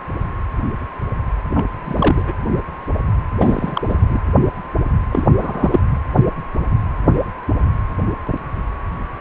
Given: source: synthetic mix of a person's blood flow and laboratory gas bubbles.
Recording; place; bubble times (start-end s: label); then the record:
Doppler ultrasound of blood flow; precordium
1.54-1.66 s: bubbles
1.85-2.34 s: bubbles
3.40-3.81 s: bubbles
3.89-3.95 s: bubbles
4.00-4.20 s: bubbles
5.11-5.27 s: bubbles
5.37-5.80 s: bubbles
5.90-5.98 s: bubbles
From the record:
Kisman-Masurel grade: 222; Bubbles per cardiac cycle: several, 3 to 8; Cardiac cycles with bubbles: 10 to 50%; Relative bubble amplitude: moderate (0.250 to 0.450); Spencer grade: 2 (many but less than half of the cardiac periods contain bubble signals, singularly or in groups); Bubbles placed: anywhere in the cardiac cycle